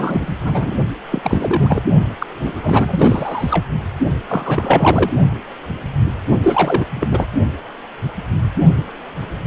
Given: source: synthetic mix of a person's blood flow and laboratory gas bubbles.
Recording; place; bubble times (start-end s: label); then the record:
Doppler ultrasound of blood flow; precordium
0.00-0.39 s: bubbles
0.42-0.75 s: bubbles
1.10-1.21 s: bubbles
1.24-1.84 s: bubbles
2.19-2.27 s: bubbles
2.40-3.66 s: bubbles
4.29-5.11 s: bubbles
6.43-6.85 s: bubbles
6.96-7.25 s: bubbles
From the record:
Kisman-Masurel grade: 333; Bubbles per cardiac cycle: rolling drumbeat, 9 or more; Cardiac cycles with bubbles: 50 to 99%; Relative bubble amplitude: loud (0.450 to 0.775); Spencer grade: 3 (all of the cardiac periods contain showers or single bubble signals, but not dominating or overriding the cardiac motion signals); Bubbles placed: only in the low amplitude regions of the cardiac cycle